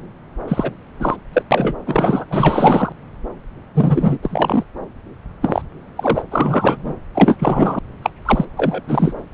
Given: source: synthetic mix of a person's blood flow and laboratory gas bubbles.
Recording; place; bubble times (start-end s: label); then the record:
Doppler ultrasound of blood flow; subclavian vein
0.47-0.70 s: bubbles
0.99-1.17 s: bubbles
1.33-1.43 s: bubbles
1.51-1.76 s: bubbles
1.86-2.25 s: bubbles
2.29-2.92 s: bubbles
3.75-4.18 s: bubbles
4.22-4.64 s: bubbles
5.42-5.62 s: bubbles
5.96-6.22 s: bubbles
6.30-6.93 s: bubbles
7.14-7.36 s: bubbles
7.38-7.79 s: bubbles
8.02-8.10 s: bubbles
8.25-8.45 s: bubbles
8.57-8.82 s: bubbles
8.88-9.13 s: bubbles
9.32-9.34 s: bubbles
From the record:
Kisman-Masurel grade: 243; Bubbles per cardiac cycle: several, 3 to 8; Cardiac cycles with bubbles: 100%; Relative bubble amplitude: loud (0.450 to 0.775); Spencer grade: 3 (all of the cardiac periods contain showers or single bubble signals, but not dominating or overriding the cardiac motion signals); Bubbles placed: anywhere in the cardiac cycle